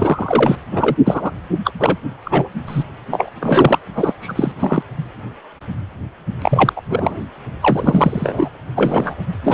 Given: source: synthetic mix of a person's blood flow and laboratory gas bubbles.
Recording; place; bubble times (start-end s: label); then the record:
Doppler ultrasound of blood flow; precordium
0.00-0.55 s: bubbles
0.71-0.96 s: bubbles
1.05-1.31 s: bubbles
1.64-1.72 s: bubbles
1.79-1.98 s: bubbles
2.24-2.49 s: bubbles
2.66-2.83 s: bubbles
3.11-3.29 s: bubbles
3.40-3.79 s: bubbles
3.95-4.13 s: bubbles
4.21-4.33 s: bubbles
4.35-4.52 s: bubbles
4.59-4.83 s: bubbles
6.42-6.73 s: bubbles
6.76-6.81 s: bubbles
6.89-7.21 s: bubbles
7.61-8.49 s: bubbles
8.76-9.15 s: bubbles
9.44-9.54 s: bubbles
From the record:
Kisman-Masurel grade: 333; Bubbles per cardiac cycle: rolling drumbeat, 9 or more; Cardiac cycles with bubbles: 50 to 99%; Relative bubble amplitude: loud (0.450 to 0.775); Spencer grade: 3 (all of the cardiac periods contain showers or single bubble signals, but not dominating or overriding the cardiac motion signals); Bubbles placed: only in the low amplitude regions of the cardiac cycle